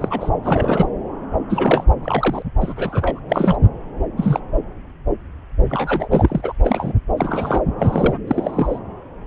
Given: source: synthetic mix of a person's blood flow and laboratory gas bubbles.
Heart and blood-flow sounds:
Doppler ultrasound of blood flow; subclavian vein
0.00-0.30 s: bubbles
0.44-0.88 s: bubbles
1.50-1.85 s: bubbles
2.02-2.42 s: bubbles
2.60-3.20 s: bubbles
3.29-3.58 s: bubbles
4.17-4.40 s: bubbles
5.64-6.08 s: bubbles
6.10-6.52 s: bubbles
6.63-6.93 s: bubbles
7.17-7.61 s: bubbles
7.78-8.14 s: bubbles
8.27-8.79 s: bubbles
From the record:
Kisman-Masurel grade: 232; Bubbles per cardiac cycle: several, 3 to 8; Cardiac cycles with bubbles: 50 to 99%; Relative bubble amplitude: moderate (0.250 to 0.450); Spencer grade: 3 (all of the cardiac periods contain showers or single bubble signals, but not dominating or overriding the cardiac motion signals); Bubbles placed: anywhere in the cardiac cycle

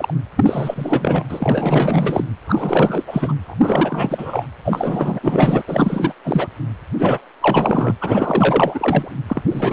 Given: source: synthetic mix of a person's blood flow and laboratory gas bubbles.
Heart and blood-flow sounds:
Doppler ultrasound of blood flow; precordium
0.00-0.13 s: bubbles
0.36-1.24 s: bubbles
1.29-2.25 s: bubbles
2.45-3.04 s: bubbles
3.07-3.35 s: bubbles
3.44-4.46 s: bubbles
4.64-5.20 s: bubbles
5.23-5.62 s: bubbles
5.67-6.13 s: bubbles
6.24-6.48 s: bubbles
6.99-7.24 s: bubbles
7.41-7.96 s: bubbles
8.01-9.11 s: bubbles
9.28-9.42 s: bubbles
9.50-9.73 s: bubbles
From the record:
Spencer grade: 4 (maximum detectable bubble signal sounding continuously throughout systole and diastole of every cardiac period, and overriding the amplitude of the normal cardiac signals); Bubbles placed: anywhere in the cardiac cycle

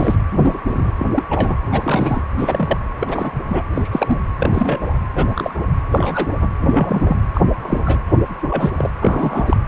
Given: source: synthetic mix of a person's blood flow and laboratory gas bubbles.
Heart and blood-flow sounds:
Doppler ultrasound of blood flow; precordium
0.00-0.15 s: bubbles
0.32-0.58 s: bubbles
0.68-0.93 s: bubbles
0.98-1.07 s: bubbles
1.16-1.24 s: bubbles
1.30-1.57 s: bubbles
1.71-2.23 s: bubbles
2.37-2.77 s: bubbles
3.00-3.31 s: bubbles
3.46-3.62 s: bubbles
3.74-3.89 s: bubbles
3.92-4.19 s: bubbles
4.38-4.99 s: bubbles
5.16-5.25 s: bubbles
5.29-5.54 s: bubbles
5.93-6.35 s: bubbles
6.41-6.49 s: bubbles
6.60-7.17 s: bubbles
7.33-7.42 s: bubbles
7.58-8.02 s: bubbles
8.50-8.71 s: bubbles
8.77-8.90 s: bubbles
9.00-9.57 s: bubbles
From the record:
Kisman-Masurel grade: 242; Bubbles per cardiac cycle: several, 3 to 8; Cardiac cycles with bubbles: 100%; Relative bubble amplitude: moderate (0.250 to 0.450); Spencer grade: 3 (all of the cardiac periods contain showers or single bubble signals, but not dominating or overriding the cardiac motion signals); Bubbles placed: anywhere in the cardiac cycle

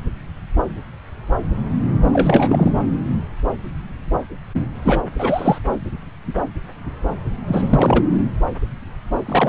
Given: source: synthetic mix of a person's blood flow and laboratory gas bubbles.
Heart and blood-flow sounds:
Doppler ultrasound of blood flow; subclavian vein
2.13-2.72 s: bubbles
4.84-5.03 s: bubbles
5.18-5.58 s: bubbles
7.47-8.04 s: bubbles
9.25-9.49 s: bubbles
From the record:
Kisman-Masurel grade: 233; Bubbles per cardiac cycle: several, 3 to 8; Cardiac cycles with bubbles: 50 to 99%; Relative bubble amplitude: loud (0.450 to 0.775); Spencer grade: 3 (all of the cardiac periods contain showers or single bubble signals, but not dominating or overriding the cardiac motion signals); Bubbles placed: anywhere in the cardiac cycle

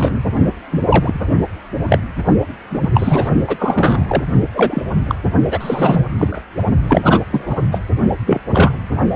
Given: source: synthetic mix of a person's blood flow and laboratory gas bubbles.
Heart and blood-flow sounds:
Doppler ultrasound of blood flow; precordium
0.00-0.20 s: bubbles
0.70-0.86 s: bubbles
0.90-1.28 s: bubbles
1.89-1.98 s: bubbles
2.71-2.90 s: bubbles
2.94-3.29 s: bubbles
3.47-4.05 s: bubbles
4.08-4.25 s: bubbles
4.54-4.83 s: bubbles
5.08-5.15 s: bubbles
5.50-6.02 s: bubbles
6.17-6.42 s: bubbles
6.87-7.21 s: bubbles
7.31-7.54 s: bubbles
7.72-7.78 s: bubbles
8.26-8.40 s: bubbles
8.51-8.72 s: bubbles
From the record:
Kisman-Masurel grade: 243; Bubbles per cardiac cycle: several, 3 to 8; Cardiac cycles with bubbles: 100%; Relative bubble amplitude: loud (0.450 to 0.775); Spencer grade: 3 (all of the cardiac periods contain showers or single bubble signals, but not dominating or overriding the cardiac motion signals); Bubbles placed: only in the low amplitude regions of the cardiac cycle

